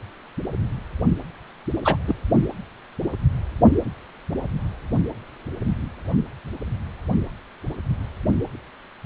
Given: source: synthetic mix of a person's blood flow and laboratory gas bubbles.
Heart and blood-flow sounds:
Doppler ultrasound of blood flow; precordium
1.84-1.96 s: bubbles
2.07-2.14 s: bubbles
From the record:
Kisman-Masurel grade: 113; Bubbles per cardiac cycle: 1 to 2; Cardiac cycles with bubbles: 1 to 10%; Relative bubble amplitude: loud (0.450 to 0.775); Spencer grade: 1 (occasional bubble signal discernible with the cardiac motion signal, with majority of cardiac periods free of bubbles); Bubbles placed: only in the low amplitude regions of the cardiac cycle

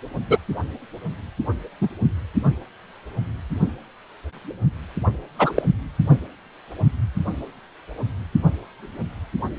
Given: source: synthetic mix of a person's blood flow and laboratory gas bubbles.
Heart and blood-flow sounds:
Doppler ultrasound of blood flow; precordium
0.29-0.37 s: bubbles
1.81-1.89 s: bubbles
5.38-5.54 s: bubbles
5.56-5.62 s: bubbles
From the record:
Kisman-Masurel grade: 123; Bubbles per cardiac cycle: 1 to 2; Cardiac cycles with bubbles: 10 to 50%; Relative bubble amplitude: loud (0.450 to 0.775); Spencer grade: 2 (many but less than half of the cardiac periods contain bubble signals, singularly or in groups); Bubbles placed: only in the low amplitude regions of the cardiac cycle

